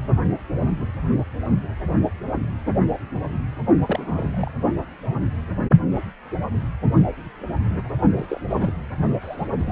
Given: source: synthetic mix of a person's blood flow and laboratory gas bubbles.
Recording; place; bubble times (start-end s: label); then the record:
Doppler ultrasound of blood flow; precordium
3.86-4.50 s: bubbles
8.18-8.41 s: bubbles
8.49-8.73 s: bubbles
9.21-9.47 s: bubbles
9.58-9.71 s: bubbles
From the record:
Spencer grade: 2 (many but less than half of the cardiac periods contain bubble signals, singularly or in groups); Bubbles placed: only in the low amplitude regions of the cardiac cycle